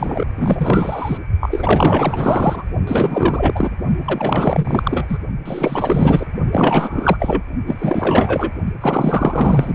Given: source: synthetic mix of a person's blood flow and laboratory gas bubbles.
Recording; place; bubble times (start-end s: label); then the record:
Doppler ultrasound of blood flow; precordium
0.00-0.25 s: bubbles
0.38-1.17 s: bubbles
1.40-2.65 s: bubbles
2.87-3.70 s: bubbles
4.04-5.18 s: bubbles
5.46-6.25 s: bubbles
6.52-7.17 s: bubbles
7.19-7.42 s: bubbles
7.66-8.51 s: bubbles
8.80-9.74 s: bubbles
From the record:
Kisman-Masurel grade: 444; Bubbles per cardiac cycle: continuous sound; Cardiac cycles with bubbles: 100%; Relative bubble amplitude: maximal (0.775 to 0.999); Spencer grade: 4 (maximum detectable bubble signal sounding continuously throughout systole and diastole of every cardiac period, and overriding the amplitude of the normal cardiac signals); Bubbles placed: only in the low amplitude regions of the cardiac cycle